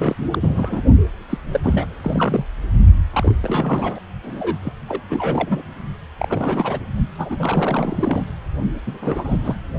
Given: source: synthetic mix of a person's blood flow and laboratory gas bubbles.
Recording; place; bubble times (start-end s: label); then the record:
Doppler ultrasound of blood flow; precordium
0.00-0.15 s: bubbles
0.30-0.39 s: bubbles
0.41-0.83 s: bubbles
1.29-1.38 s: bubbles
1.51-1.60 s: bubbles
1.63-1.94 s: bubbles
2.01-2.46 s: bubbles
3.12-3.36 s: bubbles
3.42-4.00 s: bubbles
4.22-4.58 s: bubbles
4.63-4.72 s: bubbles
4.88-5.00 s: bubbles
5.09-5.62 s: bubbles
6.18-6.79 s: bubbles
7.17-8.23 s: bubbles
8.86-8.98 s: bubbles
9.02-9.55 s: bubbles
From the record:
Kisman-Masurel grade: 332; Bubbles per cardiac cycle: rolling drumbeat, 9 or more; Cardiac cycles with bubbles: 50 to 99%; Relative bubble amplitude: moderate (0.250 to 0.450); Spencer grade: 3 (all of the cardiac periods contain showers or single bubble signals, but not dominating or overriding the cardiac motion signals); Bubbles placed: only in the low amplitude regions of the cardiac cycle